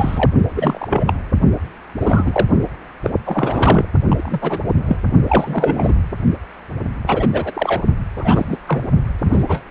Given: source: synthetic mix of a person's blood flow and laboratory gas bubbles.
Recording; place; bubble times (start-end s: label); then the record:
Doppler ultrasound of blood flow; precordium
0.00-0.31 s: bubbles
0.56-1.13 s: bubbles
2.00-2.46 s: bubbles
3.03-3.11 s: bubbles
3.25-3.85 s: bubbles
4.08-4.59 s: bubbles
4.68-4.75 s: bubbles
4.88-4.97 s: bubbles
5.29-5.93 s: bubbles
7.06-7.28 s: bubbles
7.33-7.81 s: bubbles
8.17-8.57 s: bubbles
8.66-8.82 s: bubbles
9.24-9.61 s: bubbles
From the record:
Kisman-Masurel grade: 243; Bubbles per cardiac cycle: several, 3 to 8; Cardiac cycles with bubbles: 100%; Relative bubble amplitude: loud (0.450 to 0.775); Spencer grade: 3 (all of the cardiac periods contain showers or single bubble signals, but not dominating or overriding the cardiac motion signals); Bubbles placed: only in the low amplitude regions of the cardiac cycle